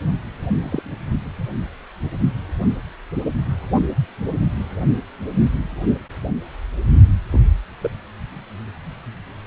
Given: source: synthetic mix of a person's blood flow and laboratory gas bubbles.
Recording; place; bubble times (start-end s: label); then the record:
Doppler ultrasound of blood flow; precordium
0.60-0.82 s: bubbles
7.31-7.40 s: bubbles
7.83-7.90 s: bubbles
From the record:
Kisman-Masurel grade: 121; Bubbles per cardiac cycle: 1 to 2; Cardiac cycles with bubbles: 10 to 50%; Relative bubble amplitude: barely perceptible (0.100 to 0.250); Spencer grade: 2 (many but less than half of the cardiac periods contain bubble signals, singularly or in groups); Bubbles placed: only in the low amplitude regions of the cardiac cycle